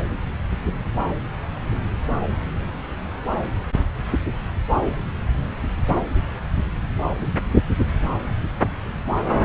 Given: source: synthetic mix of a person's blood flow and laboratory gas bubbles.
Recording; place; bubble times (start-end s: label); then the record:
Doppler ultrasound of blood flow; subclavian vein
no bubbles
From the record:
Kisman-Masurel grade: 000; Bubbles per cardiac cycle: 0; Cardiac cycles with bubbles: 0%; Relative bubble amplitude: no bubbles discernible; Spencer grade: 0 (complete lack of bubble signals)